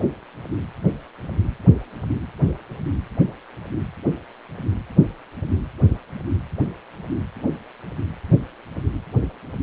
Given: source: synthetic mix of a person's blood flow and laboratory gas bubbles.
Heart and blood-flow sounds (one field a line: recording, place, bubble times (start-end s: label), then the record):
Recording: Doppler ultrasound of blood flow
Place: precordium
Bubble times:
no bubbles
From the record:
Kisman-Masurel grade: 000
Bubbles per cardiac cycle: 0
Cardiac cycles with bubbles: 0%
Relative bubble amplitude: no bubbles discernible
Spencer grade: 0 (complete lack of bubble signals)